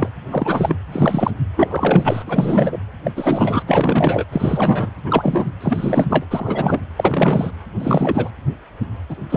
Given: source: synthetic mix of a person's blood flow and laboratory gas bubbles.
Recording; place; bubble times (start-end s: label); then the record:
Doppler ultrasound of blood flow; precordium
0.00-0.09 s: bubbles
0.30-0.75 s: bubbles
0.92-1.33 s: bubbles
1.57-2.23 s: bubbles
2.27-2.78 s: bubbles
3.04-3.11 s: bubbles
3.16-3.62 s: bubbles
3.67-4.25 s: bubbles
4.32-4.90 s: bubbles
5.04-5.51 s: bubbles
5.61-6.06 s: bubbles
6.09-6.25 s: bubbles
6.30-6.80 s: bubbles
6.96-7.50 s: bubbles
7.80-8.30 s: bubbles
9.09-9.17 s: bubbles
9.29-9.37 s: bubbles
From the record:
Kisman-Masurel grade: 333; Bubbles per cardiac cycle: rolling drumbeat, 9 or more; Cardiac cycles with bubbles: 50 to 99%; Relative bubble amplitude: loud (0.450 to 0.775); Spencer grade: 3 (all of the cardiac periods contain showers or single bubble signals, but not dominating or overriding the cardiac motion signals); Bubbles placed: anywhere in the cardiac cycle